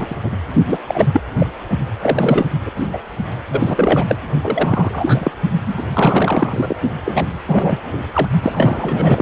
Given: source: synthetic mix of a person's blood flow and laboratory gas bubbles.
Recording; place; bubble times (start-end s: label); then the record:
Doppler ultrasound of blood flow; precordium
0.00-0.07 s: bubbles
0.10-0.17 s: bubbles
0.23-0.37 s: bubbles
0.68-0.78 s: bubbles
0.87-1.06 s: bubbles
1.13-1.20 s: bubbles
1.38-1.46 s: bubbles
2.02-2.47 s: bubbles
2.66-2.71 s: bubbles
2.77-2.88 s: bubbles
2.93-2.99 s: bubbles
3.51-4.05 s: bubbles
4.08-4.16 s: bubbles
4.42-5.32 s: bubbles
5.66-5.83 s: bubbles
5.94-6.75 s: bubbles
7.04-7.27 s: bubbles
7.47-7.79 s: bubbles
8.13-8.28 s: bubbles
8.42-9.22 s: bubbles
From the record:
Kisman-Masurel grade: 343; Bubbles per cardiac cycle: rolling drumbeat, 9 or more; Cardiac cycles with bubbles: 100%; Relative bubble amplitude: loud (0.450 to 0.775); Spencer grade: 3 (all of the cardiac periods contain showers or single bubble signals, but not dominating or overriding the cardiac motion signals); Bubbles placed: only in the low amplitude regions of the cardiac cycle